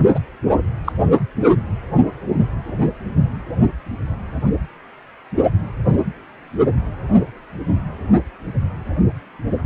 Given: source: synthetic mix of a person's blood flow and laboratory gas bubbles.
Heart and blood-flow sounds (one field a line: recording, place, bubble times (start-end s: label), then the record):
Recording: Doppler ultrasound of blood flow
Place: precordium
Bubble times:
0.14-0.19 s: bubbles
0.84-0.93 s: bubbles
From the record:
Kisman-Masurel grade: 112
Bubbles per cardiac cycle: 1 to 2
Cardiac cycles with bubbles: 1 to 10%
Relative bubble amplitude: moderate (0.250 to 0.450)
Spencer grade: 1 (occasional bubble signal discernible with the cardiac motion signal, with majority of cardiac periods free of bubbles)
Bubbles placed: only in the low amplitude regions of the cardiac cycle